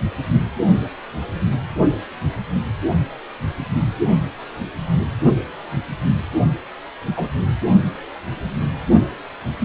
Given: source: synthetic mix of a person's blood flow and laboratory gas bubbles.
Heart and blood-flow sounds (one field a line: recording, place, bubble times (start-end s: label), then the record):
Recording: Doppler ultrasound of blood flow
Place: precordium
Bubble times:
7.16-7.30 s: bubbles
From the record:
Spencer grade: 2 (many but less than half of the cardiac periods contain bubble signals, singularly or in groups)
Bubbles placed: only in the low amplitude regions of the cardiac cycle